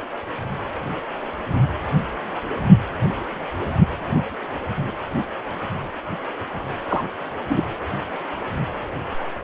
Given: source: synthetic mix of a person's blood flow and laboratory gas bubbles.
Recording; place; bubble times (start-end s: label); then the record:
Doppler ultrasound of blood flow; precordium
6.88-7.04 s: bubbles
7.49-7.61 s: bubbles
From the record:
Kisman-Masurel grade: 122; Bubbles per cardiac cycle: 1 to 2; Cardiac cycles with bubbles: 10 to 50%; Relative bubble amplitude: moderate (0.250 to 0.450); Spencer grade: 2 (many but less than half of the cardiac periods contain bubble signals, singularly or in groups); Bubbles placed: anywhere in the cardiac cycle